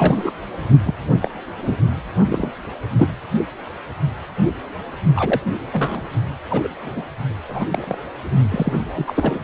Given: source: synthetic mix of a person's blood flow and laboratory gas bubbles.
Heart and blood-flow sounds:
Doppler ultrasound of blood flow; precordium
0.00-0.32 s: bubbles
0.83-0.95 s: bubbles
1.21-1.31 s: bubbles
1.61-1.77 s: bubbles
2.30-2.52 s: bubbles
2.98-3.08 s: bubbles
5.15-5.42 s: bubbles
5.72-6.01 s: bubbles
6.50-6.69 s: bubbles
6.79-7.08 s: bubbles
7.48-7.66 s: bubbles
7.71-7.98 s: bubbles
8.48-8.73 s: bubbles
8.96-9.39 s: bubbles
From the record:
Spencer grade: 3 (all of the cardiac periods contain showers or single bubble signals, but not dominating or overriding the cardiac motion signals); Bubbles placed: only in the low amplitude regions of the cardiac cycle

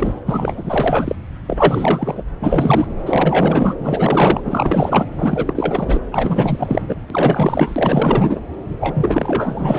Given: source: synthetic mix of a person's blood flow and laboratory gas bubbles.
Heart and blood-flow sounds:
Doppler ultrasound of blood flow; subclavian vein
0.00-0.20 s: bubbles
0.27-1.15 s: bubbles
1.47-2.24 s: bubbles
2.27-2.29 s: bubbles
2.42-2.86 s: bubbles
3.05-3.75 s: bubbles
3.78-4.41 s: bubbles
4.45-5.06 s: bubbles
5.18-6.00 s: bubbles
6.12-6.82 s: bubbles
6.87-6.97 s: bubbles
7.10-8.40 s: bubbles
8.79-9.78 s: bubbles
From the record:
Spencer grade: 4 (maximum detectable bubble signal sounding continuously throughout systole and diastole of every cardiac period, and overriding the amplitude of the normal cardiac signals); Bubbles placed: anywhere in the cardiac cycle

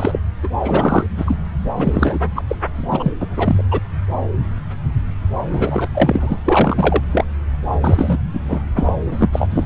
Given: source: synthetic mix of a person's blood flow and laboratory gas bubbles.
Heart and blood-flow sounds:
Doppler ultrasound of blood flow; subclavian vein
0.00-0.20 s: bubbles
0.43-0.49 s: bubbles
0.63-1.07 s: bubbles
1.18-1.36 s: bubbles
1.76-2.19 s: bubbles
2.36-2.42 s: bubbles
2.47-2.55 s: bubbles
2.71-3.12 s: bubbles
3.19-3.26 s: bubbles
3.36-3.65 s: bubbles
3.71-3.79 s: bubbles
5.50-5.87 s: bubbles
5.94-6.42 s: bubbles
6.45-7.02 s: bubbles
7.12-7.25 s: bubbles
7.81-8.18 s: bubbles
8.33-8.40 s: bubbles
8.48-8.62 s: bubbles
8.76-8.93 s: bubbles
9.12-9.29 s: bubbles
9.32-9.65 s: bubbles
From the record:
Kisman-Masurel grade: 333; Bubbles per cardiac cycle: rolling drumbeat, 9 or more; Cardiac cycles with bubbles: 50 to 99%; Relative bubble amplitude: loud (0.450 to 0.775); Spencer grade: 3 (all of the cardiac periods contain showers or single bubble signals, but not dominating or overriding the cardiac motion signals); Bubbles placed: anywhere in the cardiac cycle

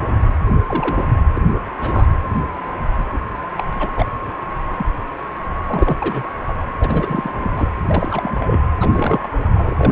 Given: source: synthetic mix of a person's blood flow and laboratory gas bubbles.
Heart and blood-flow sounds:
Doppler ultrasound of blood flow; precordium
0.66-1.04 s: bubbles
1.35-1.42 s: bubbles
1.80-2.07 s: bubbles
3.12-3.19 s: bubbles
3.56-3.64 s: bubbles
3.79-3.92 s: bubbles
3.96-4.06 s: bubbles
4.78-4.86 s: bubbles
5.67-5.97 s: bubbles
6.02-6.23 s: bubbles
6.48-6.53 s: bubbles
6.79-7.31 s: bubbles
7.42-7.70 s: bubbles
7.88-8.58 s: bubbles
8.80-8.89 s: bubbles
8.92-9.29 s: bubbles
9.54-9.75 s: bubbles
9.80-9.92 s: bubbles
From the record:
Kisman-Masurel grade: 242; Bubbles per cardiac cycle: several, 3 to 8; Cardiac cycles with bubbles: 100%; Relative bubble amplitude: moderate (0.250 to 0.450); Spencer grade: 3 (all of the cardiac periods contain showers or single bubble signals, but not dominating or overriding the cardiac motion signals); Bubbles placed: anywhere in the cardiac cycle

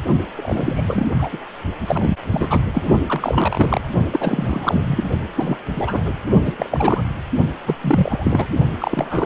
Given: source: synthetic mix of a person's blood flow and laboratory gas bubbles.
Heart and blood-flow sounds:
Doppler ultrasound of blood flow; precordium
0.36-1.07 s: bubbles
1.19-1.29 s: bubbles
1.32-1.38 s: bubbles
1.87-2.16 s: bubbles
2.30-2.62 s: bubbles
2.73-2.83 s: bubbles
3.06-3.81 s: bubbles
4.10-5.10 s: bubbles
5.35-5.59 s: bubbles
5.76-6.12 s: bubbles
6.44-6.52 s: bubbles
6.57-7.03 s: bubbles
7.66-7.76 s: bubbles
7.81-8.46 s: bubbles
8.78-9.26 s: bubbles
From the record:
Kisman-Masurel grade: 343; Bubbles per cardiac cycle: rolling drumbeat, 9 or more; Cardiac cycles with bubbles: 100%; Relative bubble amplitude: loud (0.450 to 0.775); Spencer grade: 3 (all of the cardiac periods contain showers or single bubble signals, but not dominating or overriding the cardiac motion signals); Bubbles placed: only in the low amplitude regions of the cardiac cycle

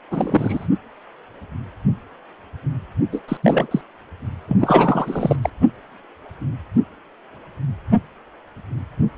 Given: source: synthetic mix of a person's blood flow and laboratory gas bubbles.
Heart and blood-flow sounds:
Doppler ultrasound of blood flow; precordium
0.11-0.68 s: bubbles
3.12-3.21 s: bubbles
3.28-3.37 s: bubbles
3.42-3.81 s: bubbles
4.47-4.56 s: bubbles
4.60-5.36 s: bubbles
5.41-5.49 s: bubbles
From the record:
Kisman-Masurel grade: 223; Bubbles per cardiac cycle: several, 3 to 8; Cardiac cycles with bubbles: 10 to 50%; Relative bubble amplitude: loud (0.450 to 0.775); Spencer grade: 2 (many but less than half of the cardiac periods contain bubble signals, singularly or in groups); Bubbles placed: only in the low amplitude regions of the cardiac cycle

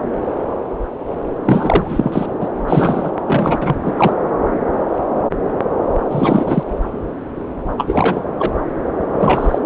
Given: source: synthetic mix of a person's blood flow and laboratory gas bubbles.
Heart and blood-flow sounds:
Doppler ultrasound of blood flow; subclavian vein
1.45-2.27 s: bubbles
2.40-2.49 s: bubbles
2.67-3.11 s: bubbles
3.27-3.58 s: bubbles
3.61-3.77 s: bubbles
3.84-3.94 s: bubbles
3.97-4.13 s: bubbles
6.11-6.63 s: bubbles
7.78-8.21 s: bubbles
8.39-8.53 s: bubbles
9.12-9.59 s: bubbles
From the record:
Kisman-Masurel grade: 333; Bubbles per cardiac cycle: rolling drumbeat, 9 or more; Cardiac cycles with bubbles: 50 to 99%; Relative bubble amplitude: loud (0.450 to 0.775); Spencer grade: 3 (all of the cardiac periods contain showers or single bubble signals, but not dominating or overriding the cardiac motion signals); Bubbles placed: anywhere in the cardiac cycle

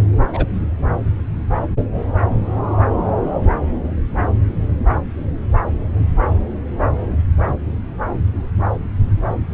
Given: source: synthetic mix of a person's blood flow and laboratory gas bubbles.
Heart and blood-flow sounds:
Doppler ultrasound of blood flow; subclavian vein
0.33-0.46 s: bubbles
From the record:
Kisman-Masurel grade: 112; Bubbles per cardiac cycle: 1 to 2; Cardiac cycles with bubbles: 1 to 10%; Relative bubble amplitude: moderate (0.250 to 0.450); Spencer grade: 1 (occasional bubble signal discernible with the cardiac motion signal, with majority of cardiac periods free of bubbles); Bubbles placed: anywhere in the cardiac cycle

